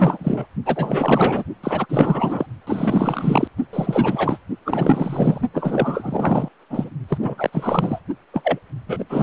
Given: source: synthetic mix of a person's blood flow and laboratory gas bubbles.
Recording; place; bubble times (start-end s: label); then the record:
Doppler ultrasound of blood flow; precordium
0.00-0.47 s: bubbles
0.65-1.43 s: bubbles
1.63-1.86 s: bubbles
1.89-2.46 s: bubbles
2.67-3.48 s: bubbles
3.73-4.38 s: bubbles
4.65-5.42 s: bubbles
5.54-6.49 s: bubbles
6.70-6.90 s: bubbles
7.08-7.17 s: bubbles
7.20-8.00 s: bubbles
8.34-8.59 s: bubbles
8.87-9.04 s: bubbles
9.09-9.23 s: bubbles
From the record:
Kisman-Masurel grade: 444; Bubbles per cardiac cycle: continuous sound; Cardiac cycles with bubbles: 100%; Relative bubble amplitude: maximal (0.775 to 0.999); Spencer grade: 4 (maximum detectable bubble signal sounding continuously throughout systole and diastole of every cardiac period, and overriding the amplitude of the normal cardiac signals); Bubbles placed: only in the low amplitude regions of the cardiac cycle